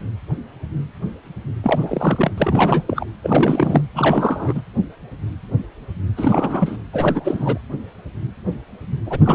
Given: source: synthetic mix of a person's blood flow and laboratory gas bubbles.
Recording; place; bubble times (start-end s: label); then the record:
Doppler ultrasound of blood flow; precordium
1.63-2.31 s: bubbles
2.38-2.82 s: bubbles
2.87-3.05 s: bubbles
3.23-3.81 s: bubbles
3.94-4.61 s: bubbles
6.17-6.78 s: bubbles
6.93-7.58 s: bubbles
9.06-9.19 s: bubbles
9.25-9.35 s: bubbles
From the record:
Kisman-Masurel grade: 333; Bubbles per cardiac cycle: rolling drumbeat, 9 or more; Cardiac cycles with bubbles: 50 to 99%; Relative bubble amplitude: loud (0.450 to 0.775); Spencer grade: 3 (all of the cardiac periods contain showers or single bubble signals, but not dominating or overriding the cardiac motion signals); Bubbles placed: anywhere in the cardiac cycle